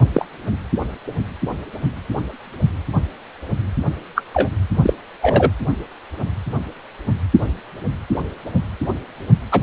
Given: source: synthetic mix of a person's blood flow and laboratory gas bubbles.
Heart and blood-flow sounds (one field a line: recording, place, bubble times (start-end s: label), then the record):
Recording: Doppler ultrasound of blood flow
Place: precordium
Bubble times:
0.00-0.02 s: bubbles
0.13-0.25 s: bubbles
4.16-4.22 s: bubbles
4.34-4.50 s: bubbles
4.77-4.94 s: bubbles
5.22-5.52 s: bubbles
9.51-9.61 s: bubbles
From the record:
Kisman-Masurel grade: 123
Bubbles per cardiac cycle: 1 to 2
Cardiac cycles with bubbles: 10 to 50%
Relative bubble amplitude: loud (0.450 to 0.775)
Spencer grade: 2 (many but less than half of the cardiac periods contain bubble signals, singularly or in groups)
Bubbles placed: anywhere in the cardiac cycle